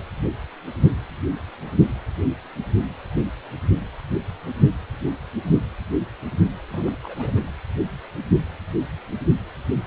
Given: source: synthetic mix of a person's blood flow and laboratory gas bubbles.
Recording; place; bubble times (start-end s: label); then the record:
Doppler ultrasound of blood flow; precordium
6.71-6.97 s: bubbles
7.03-7.51 s: bubbles
From the record:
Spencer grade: 1 (occasional bubble signal discernible with the cardiac motion signal, with majority of cardiac periods free of bubbles); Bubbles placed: anywhere in the cardiac cycle